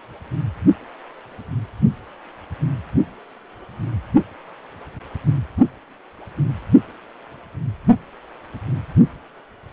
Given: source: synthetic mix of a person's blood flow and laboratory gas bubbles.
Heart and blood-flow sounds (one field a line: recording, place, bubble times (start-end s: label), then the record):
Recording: Doppler ultrasound of blood flow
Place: precordium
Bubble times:
no bubbles
From the record:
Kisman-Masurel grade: 000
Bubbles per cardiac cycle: 0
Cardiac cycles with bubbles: 0%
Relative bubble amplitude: no bubbles discernible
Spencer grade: 0 (complete lack of bubble signals)